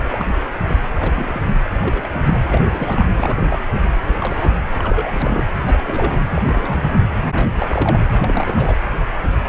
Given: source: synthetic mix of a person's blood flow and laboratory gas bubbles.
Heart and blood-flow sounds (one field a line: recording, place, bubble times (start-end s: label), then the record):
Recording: Doppler ultrasound of blood flow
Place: precordium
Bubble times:
0.00-0.07 s: bubbles
0.12-0.33 s: bubbles
0.68-0.85 s: bubbles
0.99-1.11 s: bubbles
1.15-1.41 s: bubbles
1.81-2.08 s: bubbles
2.14-3.63 s: bubbles
4.06-4.16 s: bubbles
4.20-4.51 s: bubbles
4.79-5.46 s: bubbles
5.66-6.21 s: bubbles
6.35-6.42 s: bubbles
6.46-7.00 s: bubbles
7.33-8.04 s: bubbles
8.18-8.76 s: bubbles
From the record:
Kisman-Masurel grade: 242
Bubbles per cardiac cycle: several, 3 to 8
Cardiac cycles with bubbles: 100%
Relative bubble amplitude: moderate (0.250 to 0.450)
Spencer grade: 3 (all of the cardiac periods contain showers or single bubble signals, but not dominating or overriding the cardiac motion signals)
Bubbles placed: anywhere in the cardiac cycle